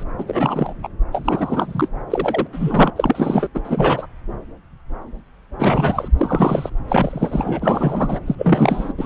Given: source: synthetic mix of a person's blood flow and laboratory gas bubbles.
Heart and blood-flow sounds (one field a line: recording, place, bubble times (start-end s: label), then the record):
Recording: Doppler ultrasound of blood flow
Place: subclavian vein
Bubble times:
0.00-0.03 s: bubbles
0.18-0.24 s: bubbles
0.27-0.74 s: bubbles
0.82-0.88 s: bubbles
1.12-1.89 s: bubbles
2.10-2.47 s: bubbles
2.52-2.90 s: bubbles
2.96-3.48 s: bubbles
3.54-3.61 s: bubbles
3.64-4.07 s: bubbles
5.58-6.08 s: bubbles
6.17-6.70 s: bubbles
6.88-8.19 s: bubbles
8.26-8.35 s: bubbles
8.38-8.92 s: bubbles
8.97-9.06 s: bubbles
From the record:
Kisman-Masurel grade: 333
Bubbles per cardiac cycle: rolling drumbeat, 9 or more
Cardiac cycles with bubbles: 50 to 99%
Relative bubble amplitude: loud (0.450 to 0.775)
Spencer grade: 3 (all of the cardiac periods contain showers or single bubble signals, but not dominating or overriding the cardiac motion signals)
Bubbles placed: anywhere in the cardiac cycle